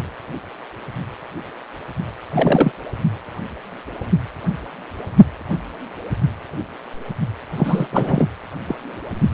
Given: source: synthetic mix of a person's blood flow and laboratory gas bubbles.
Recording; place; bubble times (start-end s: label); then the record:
Doppler ultrasound of blood flow; precordium
2.30-2.72 s: bubbles
7.55-7.87 s: bubbles
7.91-8.28 s: bubbles
8.67-8.75 s: bubbles
From the record:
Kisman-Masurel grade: 222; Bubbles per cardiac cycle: several, 3 to 8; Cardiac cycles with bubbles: 10 to 50%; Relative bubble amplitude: moderate (0.250 to 0.450); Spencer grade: 2 (many but less than half of the cardiac periods contain bubble signals, singularly or in groups); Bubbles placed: anywhere in the cardiac cycle